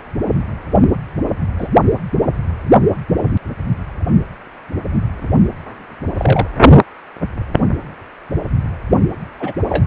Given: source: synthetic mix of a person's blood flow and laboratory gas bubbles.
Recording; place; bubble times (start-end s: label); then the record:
Doppler ultrasound of blood flow; precordium
1.58-1.68 s: bubbles
6.17-6.47 s: bubbles
9.40-9.53 s: bubbles
9.69-9.85 s: bubbles
From the record:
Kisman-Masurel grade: 122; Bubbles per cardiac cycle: 1 to 2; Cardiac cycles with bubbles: 10 to 50%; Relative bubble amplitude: moderate (0.250 to 0.450); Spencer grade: 2 (many but less than half of the cardiac periods contain bubble signals, singularly or in groups); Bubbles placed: only in the low amplitude regions of the cardiac cycle